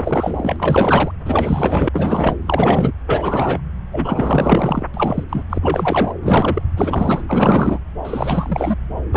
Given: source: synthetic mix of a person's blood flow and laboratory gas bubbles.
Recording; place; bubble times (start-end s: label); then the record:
Doppler ultrasound of blood flow; subclavian vein
0.00-1.11 s: bubbles
1.25-1.89 s: bubbles
1.93-2.35 s: bubbles
2.44-2.92 s: bubbles
3.06-3.61 s: bubbles
3.91-4.86 s: bubbles
4.94-5.24 s: bubbles
5.29-5.43 s: bubbles
5.49-5.58 s: bubbles
5.61-6.13 s: bubbles
6.21-6.62 s: bubbles
6.77-7.23 s: bubbles
7.28-7.79 s: bubbles
8.04-8.76 s: bubbles
9.12-9.17 s: bubbles
From the record:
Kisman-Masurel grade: 444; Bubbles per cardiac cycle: continuous sound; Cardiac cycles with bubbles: 100%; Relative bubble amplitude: maximal (0.775 to 0.999); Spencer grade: 4 (maximum detectable bubble signal sounding continuously throughout systole and diastole of every cardiac period, and overriding the amplitude of the normal cardiac signals); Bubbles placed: anywhere in the cardiac cycle